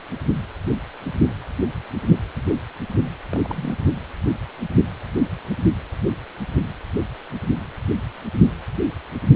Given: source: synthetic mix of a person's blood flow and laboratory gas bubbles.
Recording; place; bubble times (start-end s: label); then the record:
Doppler ultrasound of blood flow; precordium
3.31-3.40 s: bubbles
3.44-3.90 s: bubbles
From the record:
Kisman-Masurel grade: 211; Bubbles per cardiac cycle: several, 3 to 8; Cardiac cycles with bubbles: 1 to 10%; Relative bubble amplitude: barely perceptible (0.100 to 0.250); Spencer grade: 1 (occasional bubble signal discernible with the cardiac motion signal, with majority of cardiac periods free of bubbles); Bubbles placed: anywhere in the cardiac cycle